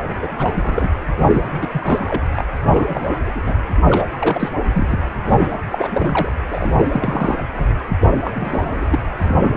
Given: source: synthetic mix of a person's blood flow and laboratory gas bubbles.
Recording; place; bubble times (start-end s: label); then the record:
Doppler ultrasound of blood flow; precordium
0.20-0.91 s: bubbles
1.21-1.49 s: bubbles
1.61-1.69 s: bubbles
1.72-2.23 s: bubbles
2.35-2.43 s: bubbles
2.64-3.15 s: bubbles
3.26-3.31 s: bubbles
3.35-3.42 s: bubbles
3.46-3.55 s: bubbles
3.82-4.06 s: bubbles
4.19-4.49 s: bubbles
4.72-4.87 s: bubbles
4.90-4.98 s: bubbles
5.26-5.60 s: bubbles
5.71-6.32 s: bubbles
6.48-7.39 s: bubbles
7.57-7.65 s: bubbles
8.00-8.09 s: bubbles
8.23-8.30 s: bubbles
8.33-8.86 s: bubbles
8.90-8.99 s: bubbles
9.20-9.57 s: bubbles
From the record:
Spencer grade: 3 (all of the cardiac periods contain showers or single bubble signals, but not dominating or overriding the cardiac motion signals); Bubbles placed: anywhere in the cardiac cycle